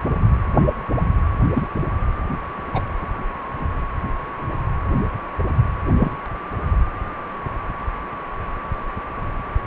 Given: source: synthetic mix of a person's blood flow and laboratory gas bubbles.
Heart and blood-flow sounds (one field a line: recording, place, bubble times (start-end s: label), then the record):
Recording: Doppler ultrasound of blood flow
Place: precordium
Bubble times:
1.55-1.67 s: bubbles
2.73-2.82 s: bubbles
6.00-6.12 s: bubbles
From the record:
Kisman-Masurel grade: 122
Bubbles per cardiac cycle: 1 to 2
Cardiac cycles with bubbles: 10 to 50%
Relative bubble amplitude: moderate (0.250 to 0.450)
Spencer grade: 2 (many but less than half of the cardiac periods contain bubble signals, singularly or in groups)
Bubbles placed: anywhere in the cardiac cycle